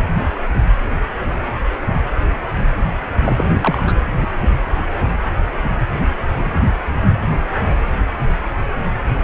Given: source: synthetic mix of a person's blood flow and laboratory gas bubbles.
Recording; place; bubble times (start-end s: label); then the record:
Doppler ultrasound of blood flow; precordium
3.25-3.44 s: bubbles
3.61-3.81 s: bubbles
3.84-3.92 s: bubbles
4.21-4.27 s: bubbles
From the record:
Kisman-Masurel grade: 212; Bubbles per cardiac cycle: several, 3 to 8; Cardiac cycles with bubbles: 1 to 10%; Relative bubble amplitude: moderate (0.250 to 0.450); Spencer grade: 1 (occasional bubble signal discernible with the cardiac motion signal, with majority of cardiac periods free of bubbles); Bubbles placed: only in the low amplitude regions of the cardiac cycle